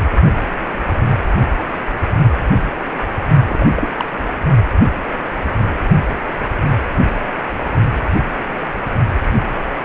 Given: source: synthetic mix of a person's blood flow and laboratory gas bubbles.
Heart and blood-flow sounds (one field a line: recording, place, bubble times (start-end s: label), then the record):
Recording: Doppler ultrasound of blood flow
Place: precordium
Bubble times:
3.50-3.71 s: bubbles
3.76-3.91 s: bubbles
3.96-4.05 s: bubbles
From the record:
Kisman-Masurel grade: 212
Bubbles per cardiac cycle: several, 3 to 8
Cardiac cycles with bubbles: 1 to 10%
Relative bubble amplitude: moderate (0.250 to 0.450)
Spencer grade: 1 (occasional bubble signal discernible with the cardiac motion signal, with majority of cardiac periods free of bubbles)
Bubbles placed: only in the low amplitude regions of the cardiac cycle